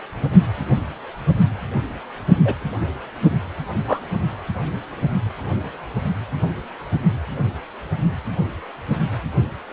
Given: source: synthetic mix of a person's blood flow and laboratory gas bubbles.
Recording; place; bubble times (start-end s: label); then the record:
Doppler ultrasound of blood flow; precordium
2.45-2.54 s: bubbles
3.87-4.00 s: bubbles
From the record:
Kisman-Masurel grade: 122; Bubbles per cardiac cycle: 1 to 2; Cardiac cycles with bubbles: 10 to 50%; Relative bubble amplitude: moderate (0.250 to 0.450); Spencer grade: 2 (many but less than half of the cardiac periods contain bubble signals, singularly or in groups); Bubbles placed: anywhere in the cardiac cycle